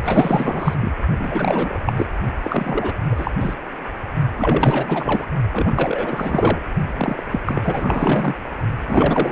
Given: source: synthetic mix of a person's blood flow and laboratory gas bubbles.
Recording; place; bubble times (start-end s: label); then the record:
Doppler ultrasound of blood flow; precordium
0.04-0.75 s: bubbles
0.81-0.92 s: bubbles
1.19-1.79 s: bubbles
1.85-2.06 s: bubbles
2.42-2.94 s: bubbles
3.11-3.31 s: bubbles
3.40-3.55 s: bubbles
4.38-5.28 s: bubbles
5.53-6.58 s: bubbles
6.88-7.23 s: bubbles
7.32-7.41 s: bubbles
7.45-8.36 s: bubbles
8.87-9.32 s: bubbles
From the record:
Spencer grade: 4 (maximum detectable bubble signal sounding continuously throughout systole and diastole of every cardiac period, and overriding the amplitude of the normal cardiac signals); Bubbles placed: only in the low amplitude regions of the cardiac cycle